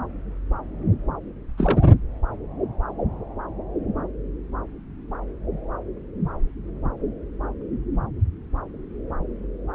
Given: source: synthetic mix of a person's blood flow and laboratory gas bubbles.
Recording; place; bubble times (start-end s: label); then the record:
Doppler ultrasound of blood flow; subclavian vein
1.57-1.86 s: bubbles
From the record:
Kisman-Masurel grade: 112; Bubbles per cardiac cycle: 1 to 2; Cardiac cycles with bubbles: 1 to 10%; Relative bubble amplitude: moderate (0.250 to 0.450); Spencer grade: 1 (occasional bubble signal discernible with the cardiac motion signal, with majority of cardiac periods free of bubbles); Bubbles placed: anywhere in the cardiac cycle